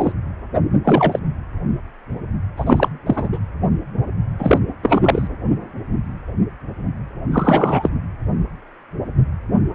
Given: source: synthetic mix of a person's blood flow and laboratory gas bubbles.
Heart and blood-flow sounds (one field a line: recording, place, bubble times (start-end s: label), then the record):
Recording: Doppler ultrasound of blood flow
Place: precordium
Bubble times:
0.00-0.12 s: bubbles
0.84-1.19 s: bubbles
2.57-2.89 s: bubbles
3.06-3.29 s: bubbles
3.32-3.39 s: bubbles
4.39-4.58 s: bubbles
4.83-5.27 s: bubbles
7.32-7.90 s: bubbles
From the record:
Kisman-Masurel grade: 223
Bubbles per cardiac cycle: several, 3 to 8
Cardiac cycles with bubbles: 10 to 50%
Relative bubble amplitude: loud (0.450 to 0.775)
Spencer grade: 2 (many but less than half of the cardiac periods contain bubble signals, singularly or in groups)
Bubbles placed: anywhere in the cardiac cycle